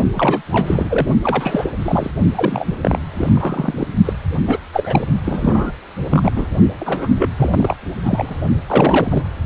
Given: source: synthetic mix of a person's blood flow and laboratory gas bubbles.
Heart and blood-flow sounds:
Doppler ultrasound of blood flow; precordium
0.15-0.42 s: bubbles
0.52-1.08 s: bubbles
1.23-1.71 s: bubbles
1.79-2.11 s: bubbles
2.35-2.77 s: bubbles
2.81-2.99 s: bubbles
3.14-3.32 s: bubbles
3.35-3.87 s: bubbles
4.05-4.13 s: bubbles
4.47-4.59 s: bubbles
4.73-5.04 s: bubbles
5.25-5.71 s: bubbles
6.10-6.32 s: bubbles
6.35-6.46 s: bubbles
6.79-7.07 s: bubbles
7.15-7.29 s: bubbles
7.37-7.76 s: bubbles
8.04-8.44 s: bubbles
8.66-9.22 s: bubbles
From the record:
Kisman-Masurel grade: 342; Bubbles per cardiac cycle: rolling drumbeat, 9 or more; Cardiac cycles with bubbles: 100%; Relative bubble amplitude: moderate (0.250 to 0.450); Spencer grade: 3 (all of the cardiac periods contain showers or single bubble signals, but not dominating or overriding the cardiac motion signals); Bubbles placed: only in the low amplitude regions of the cardiac cycle

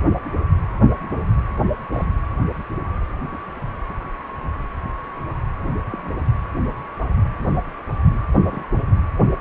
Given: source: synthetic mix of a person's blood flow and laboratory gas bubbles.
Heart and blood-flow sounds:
Doppler ultrasound of blood flow; precordium
1.93-2.05 s: bubbles
3.31-3.38 s: bubbles
5.89-6.13 s: bubbles
8.46-8.67 s: bubbles
From the record:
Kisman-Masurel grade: 121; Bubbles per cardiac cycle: 1 to 2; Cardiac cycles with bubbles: 10 to 50%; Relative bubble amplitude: barely perceptible (0.100 to 0.250); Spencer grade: 2 (many but less than half of the cardiac periods contain bubble signals, singularly or in groups); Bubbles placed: anywhere in the cardiac cycle

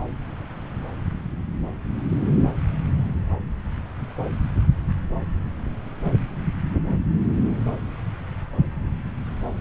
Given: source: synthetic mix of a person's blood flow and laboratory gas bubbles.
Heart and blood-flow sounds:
Doppler ultrasound of blood flow; subclavian vein
no bubbles
From the record:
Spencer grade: 0 (complete lack of bubble signals)

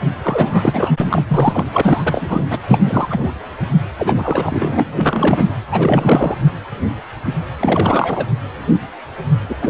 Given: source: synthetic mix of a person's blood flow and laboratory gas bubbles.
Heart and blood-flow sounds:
Doppler ultrasound of blood flow; precordium
0.23-0.91 s: bubbles
1.00-1.22 s: bubbles
1.29-1.65 s: bubbles
1.73-2.46 s: bubbles
2.49-2.58 s: bubbles
2.67-2.80 s: bubbles
2.84-3.30 s: bubbles
3.98-4.85 s: bubbles
4.96-5.51 s: bubbles
5.72-6.37 s: bubbles
7.59-8.26 s: bubbles
9.49-9.56 s: bubbles
9.61-9.70 s: bubbles
From the record:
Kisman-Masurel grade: 333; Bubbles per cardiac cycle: rolling drumbeat, 9 or more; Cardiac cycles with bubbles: 50 to 99%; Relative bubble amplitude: loud (0.450 to 0.775); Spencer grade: 3 (all of the cardiac periods contain showers or single bubble signals, but not dominating or overriding the cardiac motion signals); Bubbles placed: anywhere in the cardiac cycle

